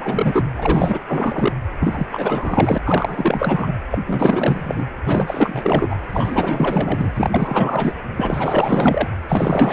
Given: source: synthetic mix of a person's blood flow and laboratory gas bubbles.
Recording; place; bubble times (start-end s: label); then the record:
Doppler ultrasound of blood flow; precordium
0.00-0.49 s: bubbles
0.56-1.00 s: bubbles
1.08-1.52 s: bubbles
1.80-2.06 s: bubbles
2.11-2.78 s: bubbles
2.84-3.71 s: bubbles
3.91-3.98 s: bubbles
4.06-4.85 s: bubbles
5.05-6.01 s: bubbles
6.12-7.94 s: bubbles
8.17-9.11 s: bubbles
9.21-9.73 s: bubbles
From the record:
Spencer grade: 4 (maximum detectable bubble signal sounding continuously throughout systole and diastole of every cardiac period, and overriding the amplitude of the normal cardiac signals); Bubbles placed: anywhere in the cardiac cycle